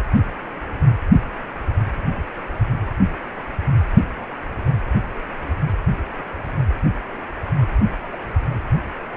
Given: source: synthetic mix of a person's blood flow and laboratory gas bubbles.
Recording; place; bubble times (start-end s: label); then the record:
Doppler ultrasound of blood flow; precordium
0.16-0.22 s: bubbles
8.12-8.18 s: bubbles
From the record:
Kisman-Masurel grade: 121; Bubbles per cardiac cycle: 1 to 2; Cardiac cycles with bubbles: 10 to 50%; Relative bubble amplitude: barely perceptible (0.100 to 0.250); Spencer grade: 2 (many but less than half of the cardiac periods contain bubble signals, singularly or in groups); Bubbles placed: anywhere in the cardiac cycle